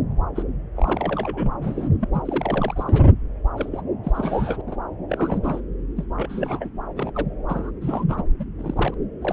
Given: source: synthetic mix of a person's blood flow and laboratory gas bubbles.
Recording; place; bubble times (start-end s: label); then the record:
Doppler ultrasound of blood flow; subclavian vein
0.36-0.42 s: bubbles
0.76-1.89 s: bubbles
2.00-2.08 s: bubbles
2.13-3.03 s: bubbles
3.56-3.81 s: bubbles
4.03-4.61 s: bubbles
4.67-4.75 s: bubbles
5.09-5.61 s: bubbles
5.96-6.05 s: bubbles
6.17-6.69 s: bubbles
6.96-7.12 s: bubbles
7.14-7.26 s: bubbles
7.48-7.71 s: bubbles
7.82-8.04 s: bubbles
8.08-8.24 s: bubbles
8.39-8.45 s: bubbles
8.59-8.95 s: bubbles
9.21-9.33 s: bubbles
From the record:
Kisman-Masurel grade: 332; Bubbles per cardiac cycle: rolling drumbeat, 9 or more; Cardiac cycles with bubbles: 50 to 99%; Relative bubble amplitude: moderate (0.250 to 0.450); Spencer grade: 3 (all of the cardiac periods contain showers or single bubble signals, but not dominating or overriding the cardiac motion signals); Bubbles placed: anywhere in the cardiac cycle